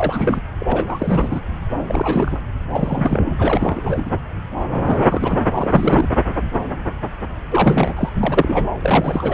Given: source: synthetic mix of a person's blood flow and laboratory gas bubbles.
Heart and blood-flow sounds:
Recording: Doppler ultrasound of blood flow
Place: subclavian vein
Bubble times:
0.00-0.42 s: bubbles
0.58-1.42 s: bubbles
1.89-2.40 s: bubbles
2.69-3.35 s: bubbles
3.39-4.19 s: bubbles
4.87-5.40 s: bubbles
5.52-6.10 s: bubbles
7.50-8.09 s: bubbles
8.13-8.67 s: bubbles
8.81-9.34 s: bubbles
From the record:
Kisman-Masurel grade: 332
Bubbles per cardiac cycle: rolling drumbeat, 9 or more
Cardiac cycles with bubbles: 50 to 99%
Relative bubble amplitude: moderate (0.250 to 0.450)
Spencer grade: 3 (all of the cardiac periods contain showers or single bubble signals, but not dominating or overriding the cardiac motion signals)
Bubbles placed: anywhere in the cardiac cycle

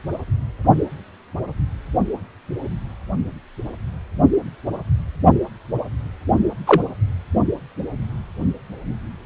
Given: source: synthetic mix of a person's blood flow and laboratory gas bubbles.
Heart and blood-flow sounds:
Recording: Doppler ultrasound of blood flow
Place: precordium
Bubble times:
6.67-6.82 s: bubbles
From the record:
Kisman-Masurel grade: 113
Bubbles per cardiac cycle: 1 to 2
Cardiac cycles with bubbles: 1 to 10%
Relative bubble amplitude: loud (0.450 to 0.775)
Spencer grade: 1 (occasional bubble signal discernible with the cardiac motion signal, with majority of cardiac periods free of bubbles)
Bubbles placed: only in the low amplitude regions of the cardiac cycle

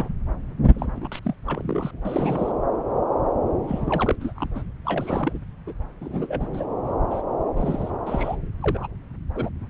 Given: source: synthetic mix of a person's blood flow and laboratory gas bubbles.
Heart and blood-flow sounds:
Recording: Doppler ultrasound of blood flow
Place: subclavian vein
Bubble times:
0.00-0.08 s: bubbles
0.65-1.08 s: bubbles
1.11-1.20 s: bubbles
1.23-1.35 s: bubbles
1.46-1.91 s: bubbles
2.05-2.52 s: bubbles
3.67-4.16 s: bubbles
4.20-4.33 s: bubbles
4.35-4.47 s: bubbles
4.55-4.62 s: bubbles
4.84-5.38 s: bubbles
5.67-5.74 s: bubbles
6.00-6.47 s: bubbles
6.53-6.65 s: bubbles
7.11-7.21 s: bubbles
7.57-7.91 s: bubbles
8.06-8.35 s: bubbles
8.60-8.87 s: bubbles
9.34-9.49 s: bubbles
From the record:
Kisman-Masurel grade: 232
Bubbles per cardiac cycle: several, 3 to 8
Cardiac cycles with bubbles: 50 to 99%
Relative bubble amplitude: moderate (0.250 to 0.450)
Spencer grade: 3 (all of the cardiac periods contain showers or single bubble signals, but not dominating or overriding the cardiac motion signals)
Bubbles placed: anywhere in the cardiac cycle

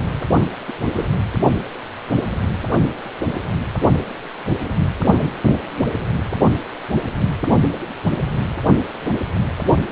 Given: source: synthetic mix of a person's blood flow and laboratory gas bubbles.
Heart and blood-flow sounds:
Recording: Doppler ultrasound of blood flow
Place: precordium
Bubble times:
0.67-0.72 s: bubbles
0.92-1.08 s: bubbles
From the record:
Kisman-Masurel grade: 122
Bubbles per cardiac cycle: 1 to 2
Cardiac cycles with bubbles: 10 to 50%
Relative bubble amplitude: moderate (0.250 to 0.450)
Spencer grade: 2 (many but less than half of the cardiac periods contain bubble signals, singularly or in groups)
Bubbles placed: only in the low amplitude regions of the cardiac cycle

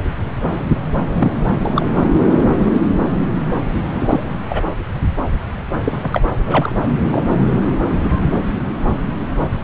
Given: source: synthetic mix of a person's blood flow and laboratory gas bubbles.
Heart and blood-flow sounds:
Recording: Doppler ultrasound of blood flow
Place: subclavian vein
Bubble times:
0.51-0.59 s: bubbles
1.20-1.32 s: bubbles
1.62-1.91 s: bubbles
3.72-4.22 s: bubbles
4.49-4.61 s: bubbles
5.80-6.21 s: bubbles
6.46-6.75 s: bubbles
7.11-7.27 s: bubbles
From the record:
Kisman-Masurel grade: 123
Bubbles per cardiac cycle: 1 to 2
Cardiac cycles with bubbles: 10 to 50%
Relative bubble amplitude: loud (0.450 to 0.775)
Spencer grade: 2 (many but less than half of the cardiac periods contain bubble signals, singularly or in groups)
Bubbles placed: anywhere in the cardiac cycle

